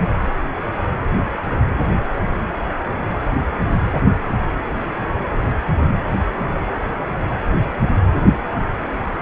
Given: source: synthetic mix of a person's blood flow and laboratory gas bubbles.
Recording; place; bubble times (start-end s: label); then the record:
Doppler ultrasound of blood flow; precordium
no bubbles
From the record:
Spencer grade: 0 (complete lack of bubble signals)